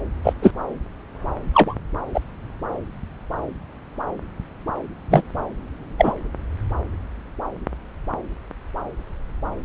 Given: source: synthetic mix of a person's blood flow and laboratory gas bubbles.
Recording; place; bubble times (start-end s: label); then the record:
Doppler ultrasound of blood flow; subclavian vein
0.23-0.33 s: bubbles
0.41-0.52 s: bubbles
1.54-1.75 s: bubbles
2.14-2.20 s: bubbles
5.10-5.22 s: bubbles
5.97-6.13 s: bubbles
From the record:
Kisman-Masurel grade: 123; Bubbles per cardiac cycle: 1 to 2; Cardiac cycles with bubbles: 10 to 50%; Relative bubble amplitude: loud (0.450 to 0.775); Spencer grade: 2 (many but less than half of the cardiac periods contain bubble signals, singularly or in groups); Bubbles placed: anywhere in the cardiac cycle